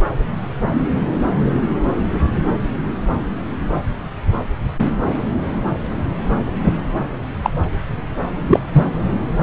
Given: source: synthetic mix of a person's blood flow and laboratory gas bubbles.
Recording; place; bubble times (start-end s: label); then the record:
Doppler ultrasound of blood flow; subclavian vein
7.43-7.51 s: bubbles
8.50-8.59 s: bubbles
8.73-8.88 s: bubbles
From the record:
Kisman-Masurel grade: 113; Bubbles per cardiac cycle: 1 to 2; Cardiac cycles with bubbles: 1 to 10%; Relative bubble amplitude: loud (0.450 to 0.775); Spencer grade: 1 (occasional bubble signal discernible with the cardiac motion signal, with majority of cardiac periods free of bubbles); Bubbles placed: anywhere in the cardiac cycle